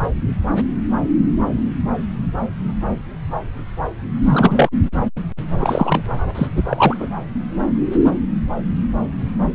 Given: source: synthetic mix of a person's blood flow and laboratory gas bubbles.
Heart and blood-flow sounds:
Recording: Doppler ultrasound of blood flow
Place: subclavian vein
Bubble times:
0.02-0.10 s: bubbles
4.24-4.69 s: bubbles
5.58-6.02 s: bubbles
6.34-6.47 s: bubbles
6.55-6.97 s: bubbles
7.00-7.07 s: bubbles
From the record:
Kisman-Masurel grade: 223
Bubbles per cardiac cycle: several, 3 to 8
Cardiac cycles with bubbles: 10 to 50%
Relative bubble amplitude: loud (0.450 to 0.775)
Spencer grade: 2 (many but less than half of the cardiac periods contain bubble signals, singularly or in groups)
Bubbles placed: anywhere in the cardiac cycle

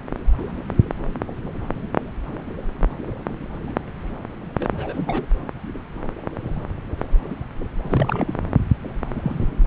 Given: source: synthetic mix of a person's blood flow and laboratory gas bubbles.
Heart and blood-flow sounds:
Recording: Doppler ultrasound of blood flow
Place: subclavian vein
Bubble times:
4.60-5.26 s: bubbles
7.82-8.39 s: bubbles
9.15-9.50 s: bubbles
From the record:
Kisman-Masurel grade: 221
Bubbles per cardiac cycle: several, 3 to 8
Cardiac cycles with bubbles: 10 to 50%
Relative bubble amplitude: barely perceptible (0.100 to 0.250)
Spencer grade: 2 (many but less than half of the cardiac periods contain bubble signals, singularly or in groups)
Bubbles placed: anywhere in the cardiac cycle

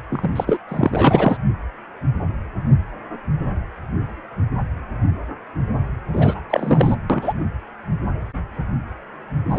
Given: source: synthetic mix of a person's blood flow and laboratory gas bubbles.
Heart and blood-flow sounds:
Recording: Doppler ultrasound of blood flow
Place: precordium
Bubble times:
0.10-0.30 s: bubbles
0.35-0.58 s: bubbles
0.69-1.37 s: bubbles
6.13-6.42 s: bubbles
6.49-6.96 s: bubbles
7.09-7.33 s: bubbles
9.49-9.59 s: bubbles
From the record:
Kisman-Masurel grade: 223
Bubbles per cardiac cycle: several, 3 to 8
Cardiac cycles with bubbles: 10 to 50%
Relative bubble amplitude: loud (0.450 to 0.775)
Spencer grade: 2 (many but less than half of the cardiac periods contain bubble signals, singularly or in groups)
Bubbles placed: anywhere in the cardiac cycle

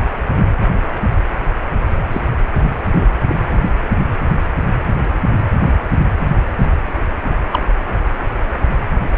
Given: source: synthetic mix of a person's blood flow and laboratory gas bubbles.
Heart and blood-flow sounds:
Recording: Doppler ultrasound of blood flow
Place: precordium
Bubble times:
2.12-2.21 s: bubbles
2.92-3.05 s: bubbles
3.27-3.36 s: bubbles
7.52-7.62 s: bubbles
From the record:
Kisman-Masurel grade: 123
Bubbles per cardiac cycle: 1 to 2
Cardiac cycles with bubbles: 10 to 50%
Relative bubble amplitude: loud (0.450 to 0.775)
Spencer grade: 2 (many but less than half of the cardiac periods contain bubble signals, singularly or in groups)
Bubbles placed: anywhere in the cardiac cycle

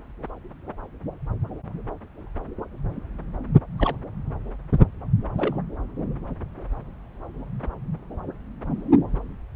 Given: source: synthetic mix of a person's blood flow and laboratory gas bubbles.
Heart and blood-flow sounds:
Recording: Doppler ultrasound of blood flow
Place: subclavian vein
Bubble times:
3.78-3.97 s: bubbles
5.36-5.60 s: bubbles
From the record:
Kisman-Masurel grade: 112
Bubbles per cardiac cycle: 1 to 2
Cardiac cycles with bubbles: 1 to 10%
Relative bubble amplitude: moderate (0.250 to 0.450)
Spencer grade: 1 (occasional bubble signal discernible with the cardiac motion signal, with majority of cardiac periods free of bubbles)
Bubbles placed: anywhere in the cardiac cycle

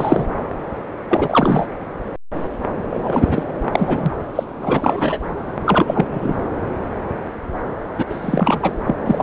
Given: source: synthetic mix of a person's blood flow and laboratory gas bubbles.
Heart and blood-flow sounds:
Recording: Doppler ultrasound of blood flow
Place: subclavian vein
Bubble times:
0.00-0.26 s: bubbles
1.08-1.67 s: bubbles
2.90-3.44 s: bubbles
3.72-4.12 s: bubbles
4.35-4.43 s: bubbles
4.62-5.19 s: bubbles
5.66-6.05 s: bubbles
6.11-6.37 s: bubbles
7.98-8.06 s: bubbles
8.10-8.72 s: bubbles
8.86-8.95 s: bubbles
9.06-9.23 s: bubbles
From the record:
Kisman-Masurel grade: 233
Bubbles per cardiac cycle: several, 3 to 8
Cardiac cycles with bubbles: 50 to 99%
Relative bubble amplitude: loud (0.450 to 0.775)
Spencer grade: 3 (all of the cardiac periods contain showers or single bubble signals, but not dominating or overriding the cardiac motion signals)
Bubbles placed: anywhere in the cardiac cycle

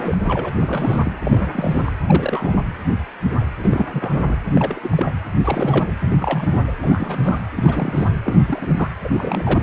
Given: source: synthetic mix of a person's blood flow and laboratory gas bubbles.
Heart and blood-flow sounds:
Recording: Doppler ultrasound of blood flow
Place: precordium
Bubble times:
0.00-0.18 s: bubbles
0.23-1.12 s: bubbles
1.25-1.92 s: bubbles
2.06-2.65 s: bubbles
3.63-4.38 s: bubbles
4.53-4.80 s: bubbles
4.82-5.12 s: bubbles
5.44-5.87 s: bubbles
6.05-6.61 s: bubbles
6.67-6.75 s: bubbles
6.78-7.41 s: bubbles
7.55-8.08 s: bubbles
8.24-8.88 s: bubbles
9.04-9.63 s: bubbles
From the record:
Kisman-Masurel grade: 332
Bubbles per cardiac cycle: rolling drumbeat, 9 or more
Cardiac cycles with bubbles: 50 to 99%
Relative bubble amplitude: moderate (0.250 to 0.450)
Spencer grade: 3 (all of the cardiac periods contain showers or single bubble signals, but not dominating or overriding the cardiac motion signals)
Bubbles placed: anywhere in the cardiac cycle

